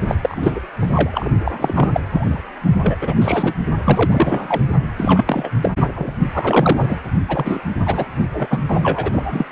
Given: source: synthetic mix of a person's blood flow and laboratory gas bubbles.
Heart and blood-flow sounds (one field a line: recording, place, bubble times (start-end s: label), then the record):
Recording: Doppler ultrasound of blood flow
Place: precordium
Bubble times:
0.08-0.15 s: bubbles
0.22-0.60 s: bubbles
0.80-1.29 s: bubbles
1.44-1.90 s: bubbles
1.93-2.00 s: bubbles
2.10-2.40 s: bubbles
2.81-2.96 s: bubbles
3.01-3.13 s: bubbles
3.21-3.54 s: bubbles
3.85-4.62 s: bubbles
4.96-5.50 s: bubbles
5.61-5.71 s: bubbles
5.81-6.17 s: bubbles
6.33-6.97 s: bubbles
7.28-7.60 s: bubbles
7.79-8.08 s: bubbles
8.33-8.62 s: bubbles
8.67-9.46 s: bubbles
From the record:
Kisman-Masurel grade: 343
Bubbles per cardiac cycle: rolling drumbeat, 9 or more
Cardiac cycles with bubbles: 100%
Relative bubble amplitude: loud (0.450 to 0.775)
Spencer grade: 3 (all of the cardiac periods contain showers or single bubble signals, but not dominating or overriding the cardiac motion signals)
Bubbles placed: only in the low amplitude regions of the cardiac cycle